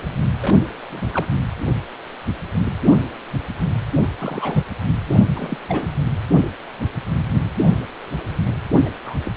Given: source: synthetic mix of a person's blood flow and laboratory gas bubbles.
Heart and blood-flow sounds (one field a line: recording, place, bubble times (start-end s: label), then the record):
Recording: Doppler ultrasound of blood flow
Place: precordium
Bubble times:
0.41-0.58 s: bubbles
0.91-1.27 s: bubbles
3.96-4.10 s: bubbles
4.19-4.65 s: bubbles
5.11-5.14 s: bubbles
5.33-5.58 s: bubbles
5.68-5.87 s: bubbles
8.85-8.89 s: bubbles
9.05-9.14 s: bubbles
9.25-9.31 s: bubbles
From the record:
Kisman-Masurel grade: 221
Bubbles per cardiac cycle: several, 3 to 8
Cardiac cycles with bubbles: 10 to 50%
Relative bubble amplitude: barely perceptible (0.100 to 0.250)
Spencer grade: 2 (many but less than half of the cardiac periods contain bubble signals, singularly or in groups)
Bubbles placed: anywhere in the cardiac cycle